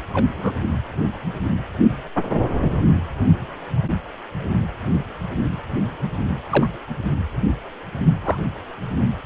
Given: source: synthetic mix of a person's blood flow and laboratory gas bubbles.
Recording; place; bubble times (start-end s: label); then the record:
Doppler ultrasound of blood flow; precordium
0.13-0.24 s: bubbles
0.35-0.55 s: bubbles
2.70-2.78 s: bubbles
6.50-6.67 s: bubbles
8.24-8.37 s: bubbles
From the record:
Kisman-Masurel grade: 122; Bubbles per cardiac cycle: 1 to 2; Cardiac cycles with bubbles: 10 to 50%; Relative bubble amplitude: moderate (0.250 to 0.450); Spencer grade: 2 (many but less than half of the cardiac periods contain bubble signals, singularly or in groups); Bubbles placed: anywhere in the cardiac cycle